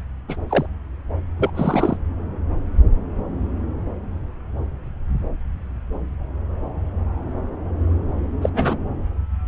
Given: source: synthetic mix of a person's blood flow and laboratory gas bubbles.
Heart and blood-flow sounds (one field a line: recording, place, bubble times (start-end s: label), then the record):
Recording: Doppler ultrasound of blood flow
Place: subclavian vein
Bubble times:
0.28-0.36 s: bubbles
0.49-0.66 s: bubbles
1.39-1.51 s: bubbles
1.55-1.97 s: bubbles
8.42-8.50 s: bubbles
8.54-8.77 s: bubbles
From the record:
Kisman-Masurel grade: 222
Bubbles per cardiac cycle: several, 3 to 8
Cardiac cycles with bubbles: 10 to 50%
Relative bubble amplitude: moderate (0.250 to 0.450)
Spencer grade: 2 (many but less than half of the cardiac periods contain bubble signals, singularly or in groups)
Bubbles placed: anywhere in the cardiac cycle